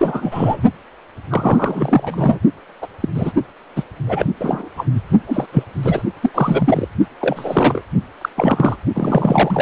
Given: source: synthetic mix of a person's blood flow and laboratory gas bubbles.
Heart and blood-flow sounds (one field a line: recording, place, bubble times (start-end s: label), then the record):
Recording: Doppler ultrasound of blood flow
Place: precordium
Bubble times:
0.00-0.61 s: bubbles
1.30-2.38 s: bubbles
2.81-2.88 s: bubbles
3.00-3.08 s: bubbles
3.15-3.32 s: bubbles
3.75-3.83 s: bubbles
4.07-4.26 s: bubbles
4.39-4.68 s: bubbles
4.77-4.87 s: bubbles
5.27-5.46 s: bubbles
5.52-5.64 s: bubbles
5.83-6.02 s: bubbles
6.22-6.31 s: bubbles
6.34-6.89 s: bubbles
7.19-7.82 s: bubbles
8.21-8.29 s: bubbles
8.35-8.76 s: bubbles
8.94-9.62 s: bubbles
From the record:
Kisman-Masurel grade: 243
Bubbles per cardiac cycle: several, 3 to 8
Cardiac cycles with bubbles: 100%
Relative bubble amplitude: loud (0.450 to 0.775)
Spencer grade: 3 (all of the cardiac periods contain showers or single bubble signals, but not dominating or overriding the cardiac motion signals)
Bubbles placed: only in the low amplitude regions of the cardiac cycle